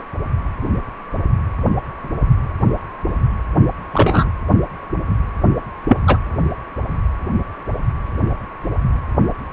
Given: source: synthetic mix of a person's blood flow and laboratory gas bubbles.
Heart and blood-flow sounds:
Doppler ultrasound of blood flow; precordium
3.93-4.29 s: bubbles
5.88-5.97 s: bubbles
6.07-6.18 s: bubbles
From the record:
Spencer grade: 2 (many but less than half of the cardiac periods contain bubble signals, singularly or in groups); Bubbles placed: anywhere in the cardiac cycle

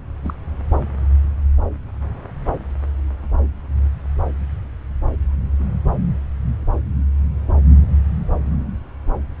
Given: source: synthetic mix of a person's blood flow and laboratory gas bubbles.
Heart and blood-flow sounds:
Doppler ultrasound of blood flow; subclavian vein
0.23-0.33 s: bubbles
From the record:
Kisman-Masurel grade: 111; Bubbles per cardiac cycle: 1 to 2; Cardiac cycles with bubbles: 1 to 10%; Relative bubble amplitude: barely perceptible (0.100 to 0.250); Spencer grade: 1 (occasional bubble signal discernible with the cardiac motion signal, with majority of cardiac periods free of bubbles); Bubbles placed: anywhere in the cardiac cycle

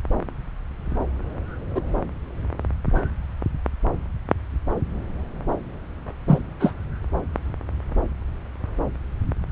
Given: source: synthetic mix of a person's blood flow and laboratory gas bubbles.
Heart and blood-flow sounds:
Doppler ultrasound of blood flow; subclavian vein
1.74-1.81 s: bubbles
6.27-6.39 s: bubbles
6.60-6.74 s: bubbles
From the record:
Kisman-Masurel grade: 123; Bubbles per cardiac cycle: 1 to 2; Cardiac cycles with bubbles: 10 to 50%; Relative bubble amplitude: loud (0.450 to 0.775); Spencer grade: 2 (many but less than half of the cardiac periods contain bubble signals, singularly or in groups); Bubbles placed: anywhere in the cardiac cycle

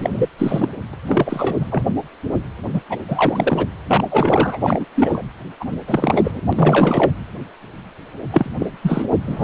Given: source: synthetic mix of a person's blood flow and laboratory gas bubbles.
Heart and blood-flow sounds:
Doppler ultrasound of blood flow; precordium
0.00-0.29 s: bubbles
0.38-0.69 s: bubbles
0.93-0.96 s: bubbles
1.07-1.68 s: bubbles
1.71-1.83 s: bubbles
2.73-2.81 s: bubbles
2.90-2.98 s: bubbles
3.08-3.66 s: bubbles
3.88-4.04 s: bubbles
4.11-4.58 s: bubbles
4.64-4.85 s: bubbles
4.95-5.22 s: bubbles
5.60-5.64 s: bubbles
5.88-6.40 s: bubbles
6.52-7.10 s: bubbles
8.30-8.50 s: bubbles
8.60-8.66 s: bubbles
8.83-9.04 s: bubbles
9.27-9.43 s: bubbles
From the record:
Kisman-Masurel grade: 332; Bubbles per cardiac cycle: rolling drumbeat, 9 or more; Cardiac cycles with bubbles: 50 to 99%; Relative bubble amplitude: moderate (0.250 to 0.450); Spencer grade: 3 (all of the cardiac periods contain showers or single bubble signals, but not dominating or overriding the cardiac motion signals); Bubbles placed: anywhere in the cardiac cycle

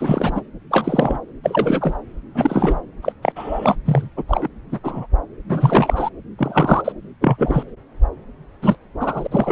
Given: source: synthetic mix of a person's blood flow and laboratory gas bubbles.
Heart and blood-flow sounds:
Doppler ultrasound of blood flow; subclavian vein
0.00-0.42 s: bubbles
0.70-1.19 s: bubbles
1.43-1.96 s: bubbles
2.34-2.80 s: bubbles
3.02-3.12 s: bubbles
3.22-3.32 s: bubbles
3.35-3.75 s: bubbles
3.85-4.08 s: bubbles
4.17-4.23 s: bubbles
4.28-4.48 s: bubbles
4.71-4.79 s: bubbles
4.83-5.07 s: bubbles
5.49-6.10 s: bubbles
6.38-6.93 s: bubbles
7.21-7.63 s: bubbles
8.62-8.75 s: bubbles
8.99-9.27 s: bubbles
9.31-9.52 s: bubbles
From the record:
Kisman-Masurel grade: 243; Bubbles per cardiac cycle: several, 3 to 8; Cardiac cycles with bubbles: 100%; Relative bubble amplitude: loud (0.450 to 0.775); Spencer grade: 3 (all of the cardiac periods contain showers or single bubble signals, but not dominating or overriding the cardiac motion signals); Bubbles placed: anywhere in the cardiac cycle

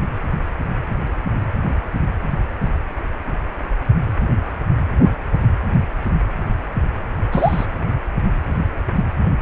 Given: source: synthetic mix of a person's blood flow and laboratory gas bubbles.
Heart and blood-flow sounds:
Doppler ultrasound of blood flow; precordium
7.31-7.67 s: bubbles
From the record:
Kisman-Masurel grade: 112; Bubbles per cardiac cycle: 1 to 2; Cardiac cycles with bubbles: 1 to 10%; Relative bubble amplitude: moderate (0.250 to 0.450); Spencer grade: 1 (occasional bubble signal discernible with the cardiac motion signal, with majority of cardiac periods free of bubbles); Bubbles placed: anywhere in the cardiac cycle

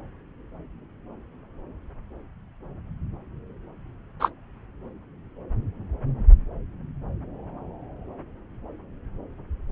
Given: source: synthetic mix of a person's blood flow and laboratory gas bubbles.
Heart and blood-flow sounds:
Doppler ultrasound of blood flow; subclavian vein
4.20-4.29 s: bubbles
From the record:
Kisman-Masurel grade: 113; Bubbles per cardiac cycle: 1 to 2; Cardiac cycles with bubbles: 1 to 10%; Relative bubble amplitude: loud (0.450 to 0.775); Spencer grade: 1 (occasional bubble signal discernible with the cardiac motion signal, with majority of cardiac periods free of bubbles); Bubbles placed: anywhere in the cardiac cycle

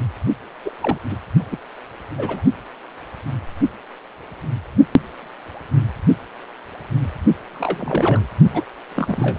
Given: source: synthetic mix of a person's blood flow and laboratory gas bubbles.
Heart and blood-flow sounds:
Doppler ultrasound of blood flow; precordium
0.00-0.02 s: bubbles
0.65-0.71 s: bubbles
0.80-0.98 s: bubbles
1.10-1.17 s: bubbles
1.51-1.57 s: bubbles
2.17-2.42 s: bubbles
7.53-8.25 s: bubbles
8.53-8.62 s: bubbles
8.89-9.38 s: bubbles
From the record:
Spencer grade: 3 (all of the cardiac periods contain showers or single bubble signals, but not dominating or overriding the cardiac motion signals); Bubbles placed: only in the low amplitude regions of the cardiac cycle

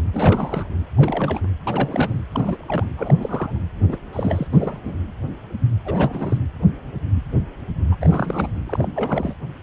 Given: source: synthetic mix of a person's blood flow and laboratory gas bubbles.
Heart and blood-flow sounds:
Doppler ultrasound of blood flow; precordium
0.12-0.69 s: bubbles
0.96-1.40 s: bubbles
1.43-1.47 s: bubbles
1.67-2.20 s: bubbles
2.32-2.88 s: bubbles
2.98-3.58 s: bubbles
3.88-3.97 s: bubbles
4.12-4.47 s: bubbles
4.51-4.79 s: bubbles
4.85-4.95 s: bubbles
5.85-6.38 s: bubbles
7.92-7.96 s: bubbles
8.00-8.52 s: bubbles
8.66-8.88 s: bubbles
8.96-9.33 s: bubbles
From the record:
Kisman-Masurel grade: 332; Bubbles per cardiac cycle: rolling drumbeat, 9 or more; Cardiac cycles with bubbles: 50 to 99%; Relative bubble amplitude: moderate (0.250 to 0.450); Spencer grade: 3 (all of the cardiac periods contain showers or single bubble signals, but not dominating or overriding the cardiac motion signals); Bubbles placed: anywhere in the cardiac cycle

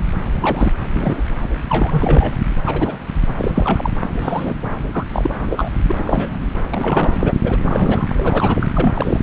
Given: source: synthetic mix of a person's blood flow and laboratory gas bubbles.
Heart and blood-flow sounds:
Doppler ultrasound of blood flow; subclavian vein
0.32-0.73 s: bubbles
0.94-1.22 s: bubbles
1.69-2.36 s: bubbles
2.65-2.96 s: bubbles
3.27-3.51 s: bubbles
3.54-3.90 s: bubbles
4.21-4.54 s: bubbles
4.92-5.04 s: bubbles
5.12-5.34 s: bubbles
5.40-5.71 s: bubbles
5.88-5.92 s: bubbles
5.97-6.39 s: bubbles
6.70-7.34 s: bubbles
7.43-8.70 s: bubbles
8.75-9.20 s: bubbles
From the record:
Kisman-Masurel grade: 242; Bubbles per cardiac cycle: several, 3 to 8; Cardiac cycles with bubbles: 100%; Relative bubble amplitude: moderate (0.250 to 0.450); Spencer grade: 3 (all of the cardiac periods contain showers or single bubble signals, but not dominating or overriding the cardiac motion signals); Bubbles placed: anywhere in the cardiac cycle

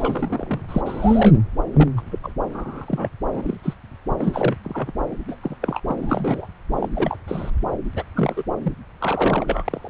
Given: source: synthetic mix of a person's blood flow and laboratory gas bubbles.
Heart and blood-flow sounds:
Doppler ultrasound of blood flow; subclavian vein
0.00-0.64 s: bubbles
0.69-0.81 s: bubbles
0.85-1.38 s: bubbles
1.73-1.88 s: bubbles
1.96-2.02 s: bubbles
2.10-2.19 s: bubbles
2.23-2.33 s: bubbles
2.50-3.09 s: bubbles
3.33-3.57 s: bubbles
3.63-3.74 s: bubbles
4.19-4.57 s: bubbles
4.65-4.92 s: bubbles
5.28-5.36 s: bubbles
5.42-5.57 s: bubbles
5.61-5.80 s: bubbles
5.89-6.48 s: bubbles
6.76-6.89 s: bubbles
6.95-7.17 s: bubbles
7.28-7.50 s: bubbles
7.96-8.03 s: bubbles
8.14-8.43 s: bubbles
8.62-8.73 s: bubbles
8.99-9.89 s: bubbles
From the record:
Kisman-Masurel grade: 242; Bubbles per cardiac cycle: several, 3 to 8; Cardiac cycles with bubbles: 100%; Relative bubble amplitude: moderate (0.250 to 0.450); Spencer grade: 3 (all of the cardiac periods contain showers or single bubble signals, but not dominating or overriding the cardiac motion signals); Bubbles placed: anywhere in the cardiac cycle

